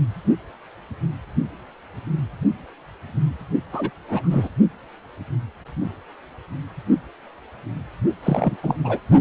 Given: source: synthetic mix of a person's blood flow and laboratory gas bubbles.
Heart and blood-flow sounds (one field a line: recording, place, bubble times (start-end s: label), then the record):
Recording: Doppler ultrasound of blood flow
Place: precordium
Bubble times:
3.72-3.91 s: bubbles
4.08-4.49 s: bubbles
8.23-8.56 s: bubbles
8.62-8.76 s: bubbles
8.83-9.00 s: bubbles
From the record:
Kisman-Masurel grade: 222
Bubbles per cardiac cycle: several, 3 to 8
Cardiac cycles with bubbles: 10 to 50%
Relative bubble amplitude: moderate (0.250 to 0.450)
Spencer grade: 2 (many but less than half of the cardiac periods contain bubble signals, singularly or in groups)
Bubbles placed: only in the low amplitude regions of the cardiac cycle